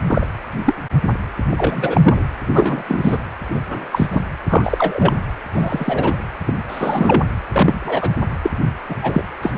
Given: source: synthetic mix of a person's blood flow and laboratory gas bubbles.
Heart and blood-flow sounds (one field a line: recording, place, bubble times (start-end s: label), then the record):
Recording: Doppler ultrasound of blood flow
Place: precordium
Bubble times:
0.06-0.27 s: bubbles
0.65-0.74 s: bubbles
1.50-2.25 s: bubbles
2.47-2.83 s: bubbles
2.88-3.23 s: bubbles
3.49-4.07 s: bubbles
4.12-4.21 s: bubbles
4.49-5.12 s: bubbles
5.54-6.17 s: bubbles
6.46-6.54 s: bubbles
6.68-7.24 s: bubbles
7.50-8.17 s: bubbles
8.42-8.50 s: bubbles
8.88-8.96 s: bubbles
9.00-9.23 s: bubbles
9.42-9.54 s: bubbles
From the record:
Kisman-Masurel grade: 243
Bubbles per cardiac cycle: several, 3 to 8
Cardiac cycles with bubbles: 100%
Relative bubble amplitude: loud (0.450 to 0.775)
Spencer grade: 3 (all of the cardiac periods contain showers or single bubble signals, but not dominating or overriding the cardiac motion signals)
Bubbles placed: anywhere in the cardiac cycle